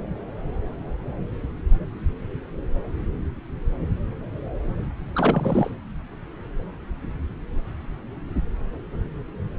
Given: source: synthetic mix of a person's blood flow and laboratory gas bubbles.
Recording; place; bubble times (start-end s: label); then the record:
Doppler ultrasound of blood flow; subclavian vein
5.15-5.71 s: bubbles
From the record:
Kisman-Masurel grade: 211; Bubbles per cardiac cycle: several, 3 to 8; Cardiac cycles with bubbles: 1 to 10%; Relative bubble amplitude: barely perceptible (0.100 to 0.250); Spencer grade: 1 (occasional bubble signal discernible with the cardiac motion signal, with majority of cardiac periods free of bubbles); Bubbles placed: anywhere in the cardiac cycle